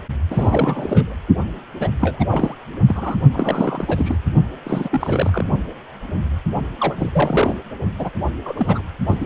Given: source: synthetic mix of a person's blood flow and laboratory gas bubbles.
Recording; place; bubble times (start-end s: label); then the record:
Doppler ultrasound of blood flow; precordium
0.30-1.15 s: bubbles
1.79-1.89 s: bubbles
2.00-2.25 s: bubbles
2.29-2.54 s: bubbles
2.87-3.17 s: bubbles
3.33-4.17 s: bubbles
4.64-5.44 s: bubbles
6.80-7.09 s: bubbles
7.13-7.58 s: bubbles
7.99-8.10 s: bubbles
8.46-8.82 s: bubbles
9.07-9.25 s: bubbles
From the record:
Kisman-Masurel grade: 332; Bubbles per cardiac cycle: rolling drumbeat, 9 or more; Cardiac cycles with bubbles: 50 to 99%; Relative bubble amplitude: moderate (0.250 to 0.450); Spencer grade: 3 (all of the cardiac periods contain showers or single bubble signals, but not dominating or overriding the cardiac motion signals); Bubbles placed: only in the low amplitude regions of the cardiac cycle